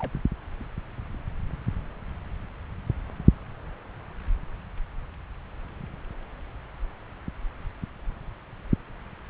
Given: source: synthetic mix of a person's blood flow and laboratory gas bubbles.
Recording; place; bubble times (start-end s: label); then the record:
Doppler ultrasound of blood flow; subclavian vein
0.00-0.12 s: bubbles
From the record:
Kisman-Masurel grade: 221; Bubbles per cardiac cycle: several, 3 to 8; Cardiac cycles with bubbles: 10 to 50%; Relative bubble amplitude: barely perceptible (0.100 to 0.250); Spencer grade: 2 (many but less than half of the cardiac periods contain bubble signals, singularly or in groups); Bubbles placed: anywhere in the cardiac cycle